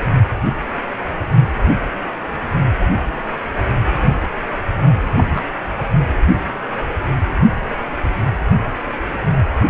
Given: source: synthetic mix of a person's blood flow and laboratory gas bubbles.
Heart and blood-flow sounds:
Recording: Doppler ultrasound of blood flow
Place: precordium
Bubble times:
5.15-5.41 s: bubbles
From the record:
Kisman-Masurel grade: 112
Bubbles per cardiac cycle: 1 to 2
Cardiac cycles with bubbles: 1 to 10%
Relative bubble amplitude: moderate (0.250 to 0.450)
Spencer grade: 1 (occasional bubble signal discernible with the cardiac motion signal, with majority of cardiac periods free of bubbles)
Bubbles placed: anywhere in the cardiac cycle

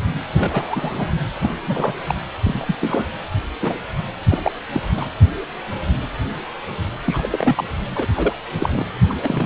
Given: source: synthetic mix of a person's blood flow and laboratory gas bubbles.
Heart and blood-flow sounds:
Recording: Doppler ultrasound of blood flow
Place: precordium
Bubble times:
0.34-1.10 s: bubbles
1.42-1.51 s: bubbles
1.62-1.94 s: bubbles
2.06-2.15 s: bubbles
2.43-2.75 s: bubbles
2.81-3.06 s: bubbles
3.60-3.79 s: bubbles
4.29-4.51 s: bubbles
4.73-4.82 s: bubbles
4.96-5.08 s: bubbles
7.05-7.64 s: bubbles
7.95-8.06 s: bubbles
8.16-8.33 s: bubbles
8.59-8.69 s: bubbles
8.72-8.86 s: bubbles
9.07-9.13 s: bubbles
9.22-9.46 s: bubbles
From the record:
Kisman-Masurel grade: 232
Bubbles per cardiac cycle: several, 3 to 8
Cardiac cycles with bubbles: 50 to 99%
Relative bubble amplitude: moderate (0.250 to 0.450)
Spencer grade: 3 (all of the cardiac periods contain showers or single bubble signals, but not dominating or overriding the cardiac motion signals)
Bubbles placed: anywhere in the cardiac cycle

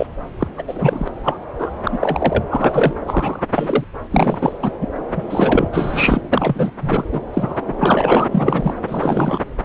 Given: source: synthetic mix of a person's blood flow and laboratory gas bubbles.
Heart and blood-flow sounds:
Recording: Doppler ultrasound of blood flow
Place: subclavian vein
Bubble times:
0.00-0.06 s: bubbles
0.39-0.47 s: bubbles
0.57-0.63 s: bubbles
0.67-1.08 s: bubbles
1.23-1.37 s: bubbles
1.58-1.70 s: bubbles
1.83-2.43 s: bubbles
2.50-2.93 s: bubbles
3.04-3.44 s: bubbles
3.55-3.85 s: bubbles
4.10-4.58 s: bubbles
4.63-4.72 s: bubbles
4.81-4.88 s: bubbles
5.15-5.22 s: bubbles
5.29-5.68 s: bubbles
5.73-6.70 s: bubbles
6.81-7.04 s: bubbles
7.12-7.20 s: bubbles
7.33-7.59 s: bubbles
7.67-7.74 s: bubbles
7.79-8.28 s: bubbles
8.31-8.74 s: bubbles
8.88-9.39 s: bubbles
From the record:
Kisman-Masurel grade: 243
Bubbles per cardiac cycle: several, 3 to 8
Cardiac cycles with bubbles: 100%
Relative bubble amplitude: loud (0.450 to 0.775)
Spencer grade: 3 (all of the cardiac periods contain showers or single bubble signals, but not dominating or overriding the cardiac motion signals)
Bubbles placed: anywhere in the cardiac cycle

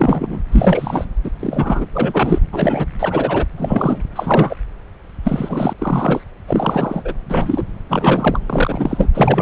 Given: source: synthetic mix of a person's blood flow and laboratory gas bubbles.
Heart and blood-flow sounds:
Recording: Doppler ultrasound of blood flow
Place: subclavian vein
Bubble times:
0.00-0.41 s: bubbles
0.52-1.09 s: bubbles
1.24-1.30 s: bubbles
1.40-1.86 s: bubbles
1.93-2.38 s: bubbles
2.53-2.87 s: bubbles
2.99-3.46 s: bubbles
3.58-4.03 s: bubbles
4.15-4.56 s: bubbles
5.23-5.73 s: bubbles
5.78-6.21 s: bubbles
6.47-7.14 s: bubbles
7.29-7.67 s: bubbles
7.89-8.39 s: bubbles
8.46-9.09 s: bubbles
9.14-9.42 s: bubbles
From the record:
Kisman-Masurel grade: 343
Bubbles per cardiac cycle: rolling drumbeat, 9 or more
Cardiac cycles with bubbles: 100%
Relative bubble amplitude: loud (0.450 to 0.775)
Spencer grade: 3 (all of the cardiac periods contain showers or single bubble signals, but not dominating or overriding the cardiac motion signals)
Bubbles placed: anywhere in the cardiac cycle

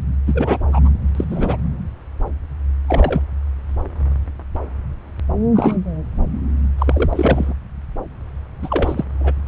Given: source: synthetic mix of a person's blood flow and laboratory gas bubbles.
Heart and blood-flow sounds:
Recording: Doppler ultrasound of blood flow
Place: subclavian vein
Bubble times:
0.26-0.58 s: bubbles
0.67-0.90 s: bubbles
1.15-1.24 s: bubbles
1.30-1.57 s: bubbles
2.88-3.23 s: bubbles
5.55-5.77 s: bubbles
6.78-7.54 s: bubbles
8.62-9.04 s: bubbles
9.20-9.32 s: bubbles
9.45-9.48 s: bubbles
From the record:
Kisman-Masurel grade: 233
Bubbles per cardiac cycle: several, 3 to 8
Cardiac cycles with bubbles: 50 to 99%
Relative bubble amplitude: loud (0.450 to 0.775)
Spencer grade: 3 (all of the cardiac periods contain showers or single bubble signals, but not dominating or overriding the cardiac motion signals)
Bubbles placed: anywhere in the cardiac cycle

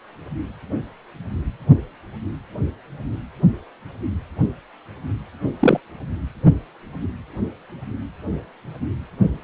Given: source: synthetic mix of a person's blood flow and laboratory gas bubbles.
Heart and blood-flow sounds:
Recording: Doppler ultrasound of blood flow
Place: precordium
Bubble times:
5.60-5.80 s: bubbles
From the record:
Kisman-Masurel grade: 112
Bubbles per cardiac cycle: 1 to 2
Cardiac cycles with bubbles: 1 to 10%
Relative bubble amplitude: moderate (0.250 to 0.450)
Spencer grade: 1 (occasional bubble signal discernible with the cardiac motion signal, with majority of cardiac periods free of bubbles)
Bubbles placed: anywhere in the cardiac cycle

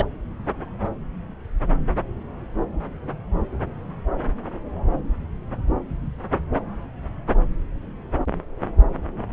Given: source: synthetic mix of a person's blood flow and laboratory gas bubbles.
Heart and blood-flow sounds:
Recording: Doppler ultrasound of blood flow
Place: subclavian vein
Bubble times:
0.00-0.05 s: bubbles
From the record:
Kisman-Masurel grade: 113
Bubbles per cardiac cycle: 1 to 2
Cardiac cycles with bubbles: 1 to 10%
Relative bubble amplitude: loud (0.450 to 0.775)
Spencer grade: 1 (occasional bubble signal discernible with the cardiac motion signal, with majority of cardiac periods free of bubbles)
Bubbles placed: anywhere in the cardiac cycle

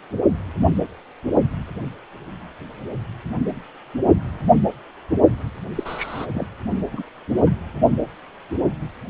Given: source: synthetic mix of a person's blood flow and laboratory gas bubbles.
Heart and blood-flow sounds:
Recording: Doppler ultrasound of blood flow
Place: precordium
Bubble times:
5.75-6.26 s: bubbles
6.34-6.46 s: bubbles
6.92-7.04 s: bubbles
7.46-7.50 s: bubbles
From the record:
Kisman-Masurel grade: 222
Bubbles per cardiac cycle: several, 3 to 8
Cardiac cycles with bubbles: 10 to 50%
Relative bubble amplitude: moderate (0.250 to 0.450)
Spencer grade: 2 (many but less than half of the cardiac periods contain bubble signals, singularly or in groups)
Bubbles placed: only in the low amplitude regions of the cardiac cycle

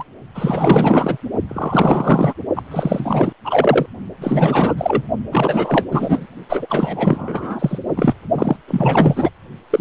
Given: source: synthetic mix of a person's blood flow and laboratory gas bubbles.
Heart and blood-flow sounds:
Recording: Doppler ultrasound of blood flow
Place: precordium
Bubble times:
0.00-0.03 s: bubbles
0.34-1.18 s: bubbles
1.49-2.35 s: bubbles
2.56-2.62 s: bubbles
2.71-3.33 s: bubbles
3.45-3.86 s: bubbles
4.21-4.74 s: bubbles
4.77-5.02 s: bubbles
5.31-5.86 s: bubbles
5.91-6.26 s: bubbles
6.49-6.67 s: bubbles
6.69-7.79 s: bubbles
7.96-8.14 s: bubbles
8.37-8.56 s: bubbles
8.67-9.30 s: bubbles
9.70-9.81 s: bubbles
From the record:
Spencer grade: 4 (maximum detectable bubble signal sounding continuously throughout systole and diastole of every cardiac period, and overriding the amplitude of the normal cardiac signals)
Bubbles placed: only in the low amplitude regions of the cardiac cycle

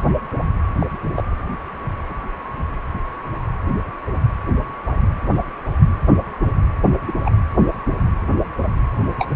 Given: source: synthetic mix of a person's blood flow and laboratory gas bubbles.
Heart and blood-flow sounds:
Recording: Doppler ultrasound of blood flow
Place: precordium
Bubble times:
0.80-0.87 s: bubbles
1.16-1.23 s: bubbles
7.07-7.13 s: bubbles
7.25-7.31 s: bubbles
8.97-9.10 s: bubbles
9.18-9.28 s: bubbles
From the record:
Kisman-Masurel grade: 122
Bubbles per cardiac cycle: 1 to 2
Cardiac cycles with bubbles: 10 to 50%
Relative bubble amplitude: moderate (0.250 to 0.450)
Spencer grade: 2 (many but less than half of the cardiac periods contain bubble signals, singularly or in groups)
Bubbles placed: anywhere in the cardiac cycle

